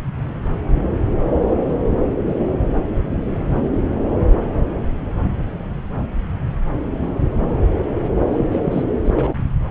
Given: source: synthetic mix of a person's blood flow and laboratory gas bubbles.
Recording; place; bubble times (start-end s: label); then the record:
Doppler ultrasound of blood flow; subclavian vein
8.32-8.46 s: bubbles
8.53-8.62 s: bubbles
8.64-8.83 s: bubbles
9.04-9.35 s: bubbles
From the record:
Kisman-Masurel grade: 212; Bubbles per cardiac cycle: several, 3 to 8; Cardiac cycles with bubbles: 1 to 10%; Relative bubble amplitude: moderate (0.250 to 0.450); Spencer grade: 1 (occasional bubble signal discernible with the cardiac motion signal, with majority of cardiac periods free of bubbles); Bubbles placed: anywhere in the cardiac cycle